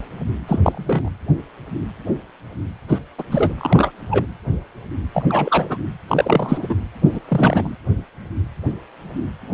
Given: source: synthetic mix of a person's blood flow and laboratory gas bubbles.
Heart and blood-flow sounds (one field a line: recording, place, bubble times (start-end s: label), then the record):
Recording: Doppler ultrasound of blood flow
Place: precordium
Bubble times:
0.48-1.09 s: bubbles
2.88-2.98 s: bubbles
3.18-3.23 s: bubbles
3.31-3.54 s: bubbles
3.58-3.91 s: bubbles
4.10-4.25 s: bubbles
5.14-5.24 s: bubbles
5.29-5.78 s: bubbles
6.08-6.75 s: bubbles
7.04-7.20 s: bubbles
7.28-7.75 s: bubbles
From the record:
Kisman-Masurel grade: 222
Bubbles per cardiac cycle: several, 3 to 8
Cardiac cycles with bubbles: 10 to 50%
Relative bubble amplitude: moderate (0.250 to 0.450)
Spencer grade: 2 (many but less than half of the cardiac periods contain bubble signals, singularly or in groups)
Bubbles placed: anywhere in the cardiac cycle